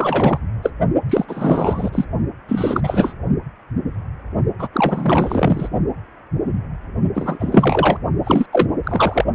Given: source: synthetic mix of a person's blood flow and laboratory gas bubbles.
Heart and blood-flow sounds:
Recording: Doppler ultrasound of blood flow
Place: precordium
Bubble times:
0.00-0.40 s: bubbles
0.62-0.72 s: bubbles
1.09-1.26 s: bubbles
1.28-2.05 s: bubbles
2.48-2.80 s: bubbles
2.83-3.13 s: bubbles
4.58-4.68 s: bubbles
4.73-5.69 s: bubbles
7.14-7.99 s: bubbles
8.23-8.46 s: bubbles
8.52-8.68 s: bubbles
8.83-9.25 s: bubbles
From the record:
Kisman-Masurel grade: 333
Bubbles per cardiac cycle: rolling drumbeat, 9 or more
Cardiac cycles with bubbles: 50 to 99%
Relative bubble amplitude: loud (0.450 to 0.775)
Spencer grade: 3 (all of the cardiac periods contain showers or single bubble signals, but not dominating or overriding the cardiac motion signals)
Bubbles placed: only in the low amplitude regions of the cardiac cycle

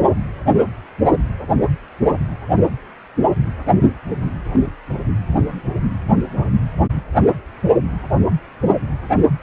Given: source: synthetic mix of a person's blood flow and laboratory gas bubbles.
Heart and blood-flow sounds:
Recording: Doppler ultrasound of blood flow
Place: precordium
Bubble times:
4.52-4.71 s: bubbles
From the record:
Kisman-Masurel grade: 111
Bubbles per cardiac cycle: 1 to 2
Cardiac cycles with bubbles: 1 to 10%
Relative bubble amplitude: barely perceptible (0.100 to 0.250)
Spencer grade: 1 (occasional bubble signal discernible with the cardiac motion signal, with majority of cardiac periods free of bubbles)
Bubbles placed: only in the low amplitude regions of the cardiac cycle

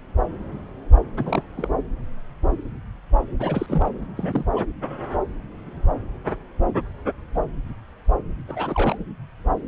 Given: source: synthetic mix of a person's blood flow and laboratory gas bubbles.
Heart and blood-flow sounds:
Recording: Doppler ultrasound of blood flow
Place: subclavian vein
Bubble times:
1.17-1.42 s: bubbles
1.57-1.75 s: bubbles
3.39-3.90 s: bubbles
4.15-4.44 s: bubbles
4.53-4.64 s: bubbles
8.48-8.98 s: bubbles
From the record:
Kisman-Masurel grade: 221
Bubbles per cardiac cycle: several, 3 to 8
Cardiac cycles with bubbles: 10 to 50%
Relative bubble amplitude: barely perceptible (0.100 to 0.250)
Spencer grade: 2 (many but less than half of the cardiac periods contain bubble signals, singularly or in groups)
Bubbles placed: anywhere in the cardiac cycle

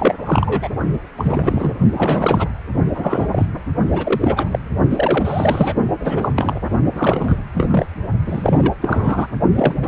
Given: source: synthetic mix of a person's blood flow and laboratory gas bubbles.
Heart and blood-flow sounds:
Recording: Doppler ultrasound of blood flow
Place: precordium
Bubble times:
0.00-0.15 s: bubbles
0.25-0.68 s: bubbles
1.17-1.74 s: bubbles
1.93-2.49 s: bubbles
2.95-3.46 s: bubbles
3.92-4.59 s: bubbles
4.90-5.74 s: bubbles
6.00-6.31 s: bubbles
6.35-6.59 s: bubbles
6.93-7.40 s: bubbles
7.54-7.69 s: bubbles
7.71-7.86 s: bubbles
8.26-8.73 s: bubbles
8.82-9.28 s: bubbles
9.54-9.75 s: bubbles
9.83-9.88 s: bubbles
From the record:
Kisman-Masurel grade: 342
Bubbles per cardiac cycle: rolling drumbeat, 9 or more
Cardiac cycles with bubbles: 100%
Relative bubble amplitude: moderate (0.250 to 0.450)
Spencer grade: 3 (all of the cardiac periods contain showers or single bubble signals, but not dominating or overriding the cardiac motion signals)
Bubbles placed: only in the low amplitude regions of the cardiac cycle

